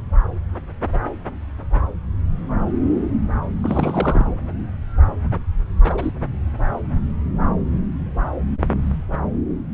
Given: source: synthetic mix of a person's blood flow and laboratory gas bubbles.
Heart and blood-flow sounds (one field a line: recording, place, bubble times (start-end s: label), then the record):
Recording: Doppler ultrasound of blood flow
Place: subclavian vein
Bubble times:
3.64-4.26 s: bubbles
5.84-6.12 s: bubbles
From the record:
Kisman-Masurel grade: 222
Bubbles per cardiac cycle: several, 3 to 8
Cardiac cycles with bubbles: 10 to 50%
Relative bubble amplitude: moderate (0.250 to 0.450)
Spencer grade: 2 (many but less than half of the cardiac periods contain bubble signals, singularly or in groups)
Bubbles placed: anywhere in the cardiac cycle